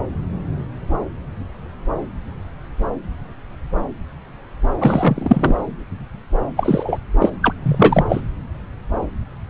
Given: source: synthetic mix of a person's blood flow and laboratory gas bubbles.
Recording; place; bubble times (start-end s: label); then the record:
Doppler ultrasound of blood flow; subclavian vein
4.79-5.60 s: bubbles
6.57-6.98 s: bubbles
7.20-7.29 s: bubbles
7.42-7.53 s: bubbles
7.62-8.05 s: bubbles
8.09-8.21 s: bubbles
From the record:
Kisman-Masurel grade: 223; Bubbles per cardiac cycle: several, 3 to 8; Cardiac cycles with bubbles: 10 to 50%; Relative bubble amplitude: loud (0.450 to 0.775); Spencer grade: 2 (many but less than half of the cardiac periods contain bubble signals, singularly or in groups); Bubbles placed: anywhere in the cardiac cycle